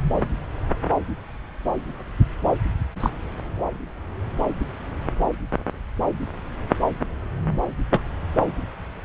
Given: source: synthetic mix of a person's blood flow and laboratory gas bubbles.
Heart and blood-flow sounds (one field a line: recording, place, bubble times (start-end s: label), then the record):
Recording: Doppler ultrasound of blood flow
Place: subclavian vein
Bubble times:
3.00-3.10 s: bubbles
7.91-8.03 s: bubbles
From the record:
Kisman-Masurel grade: 113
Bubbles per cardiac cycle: 1 to 2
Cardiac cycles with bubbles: 1 to 10%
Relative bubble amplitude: loud (0.450 to 0.775)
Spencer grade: 1 (occasional bubble signal discernible with the cardiac motion signal, with majority of cardiac periods free of bubbles)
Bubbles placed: anywhere in the cardiac cycle